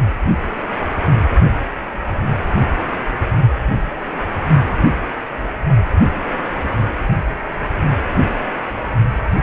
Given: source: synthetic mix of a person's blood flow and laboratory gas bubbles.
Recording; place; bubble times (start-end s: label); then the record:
Doppler ultrasound of blood flow; precordium
5.42-5.47 s: bubbles
From the record:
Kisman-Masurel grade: 111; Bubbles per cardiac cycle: 1 to 2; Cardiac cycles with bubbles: 1 to 10%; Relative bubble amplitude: barely perceptible (0.100 to 0.250); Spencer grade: 1 (occasional bubble signal discernible with the cardiac motion signal, with majority of cardiac periods free of bubbles); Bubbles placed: only in the low amplitude regions of the cardiac cycle